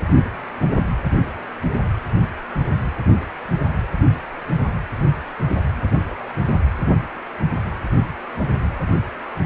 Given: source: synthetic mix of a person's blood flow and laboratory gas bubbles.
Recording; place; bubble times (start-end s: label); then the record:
Doppler ultrasound of blood flow; precordium
5.97-6.33 s: bubbles
From the record:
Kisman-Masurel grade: 111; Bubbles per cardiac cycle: 1 to 2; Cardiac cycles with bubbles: 1 to 10%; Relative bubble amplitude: barely perceptible (0.100 to 0.250); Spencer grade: 1 (occasional bubble signal discernible with the cardiac motion signal, with majority of cardiac periods free of bubbles); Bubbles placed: anywhere in the cardiac cycle